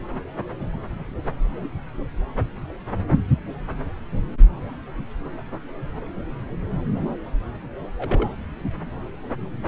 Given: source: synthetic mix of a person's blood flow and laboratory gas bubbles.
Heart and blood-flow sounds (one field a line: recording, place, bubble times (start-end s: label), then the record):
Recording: Doppler ultrasound of blood flow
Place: subclavian vein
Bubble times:
7.98-8.35 s: bubbles
From the record:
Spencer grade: 1 (occasional bubble signal discernible with the cardiac motion signal, with majority of cardiac periods free of bubbles)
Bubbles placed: anywhere in the cardiac cycle